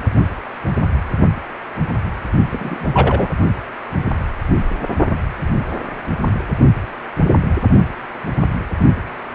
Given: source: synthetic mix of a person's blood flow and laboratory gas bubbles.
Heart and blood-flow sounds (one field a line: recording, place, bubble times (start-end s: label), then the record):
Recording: Doppler ultrasound of blood flow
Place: precordium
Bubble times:
2.50-3.29 s: bubbles
From the record:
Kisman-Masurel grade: 213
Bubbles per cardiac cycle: several, 3 to 8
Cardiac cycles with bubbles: 1 to 10%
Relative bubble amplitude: loud (0.450 to 0.775)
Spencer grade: 1 (occasional bubble signal discernible with the cardiac motion signal, with majority of cardiac periods free of bubbles)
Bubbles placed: only in the low amplitude regions of the cardiac cycle